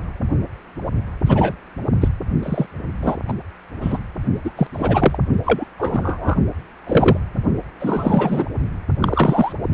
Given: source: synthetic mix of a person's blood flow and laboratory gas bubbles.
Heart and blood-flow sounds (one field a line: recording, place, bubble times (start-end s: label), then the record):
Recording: Doppler ultrasound of blood flow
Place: precordium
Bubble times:
1.26-1.56 s: bubbles
2.00-2.09 s: bubbles
2.42-2.66 s: bubbles
3.01-3.17 s: bubbles
3.28-3.33 s: bubbles
3.81-3.98 s: bubbles
4.44-4.50 s: bubbles
4.56-4.67 s: bubbles
4.73-5.18 s: bubbles
5.46-5.65 s: bubbles
5.79-6.36 s: bubbles
6.86-7.17 s: bubbles
7.79-8.45 s: bubbles
9.01-9.53 s: bubbles
9.71-9.74 s: bubbles
From the record:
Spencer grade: 3 (all of the cardiac periods contain showers or single bubble signals, but not dominating or overriding the cardiac motion signals)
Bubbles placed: only in the low amplitude regions of the cardiac cycle